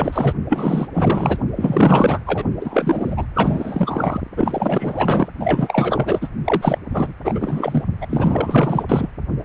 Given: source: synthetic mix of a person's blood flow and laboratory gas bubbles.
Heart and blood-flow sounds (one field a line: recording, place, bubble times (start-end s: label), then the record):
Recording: Doppler ultrasound of blood flow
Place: precordium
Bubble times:
0.00-0.33 s: bubbles
0.49-0.87 s: bubbles
0.93-1.37 s: bubbles
1.55-2.20 s: bubbles
2.26-2.45 s: bubbles
2.60-3.26 s: bubbles
3.35-4.21 s: bubbles
4.36-5.28 s: bubbles
5.39-6.19 s: bubbles
6.21-6.29 s: bubbles
6.44-6.79 s: bubbles
6.93-7.12 s: bubbles
7.24-7.83 s: bubbles
8.01-8.07 s: bubbles
8.09-9.07 s: bubbles
From the record:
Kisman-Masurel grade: 444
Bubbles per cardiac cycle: continuous sound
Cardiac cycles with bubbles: 100%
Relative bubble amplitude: maximal (0.775 to 0.999)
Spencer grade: 4 (maximum detectable bubble signal sounding continuously throughout systole and diastole of every cardiac period, and overriding the amplitude of the normal cardiac signals)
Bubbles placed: only in the low amplitude regions of the cardiac cycle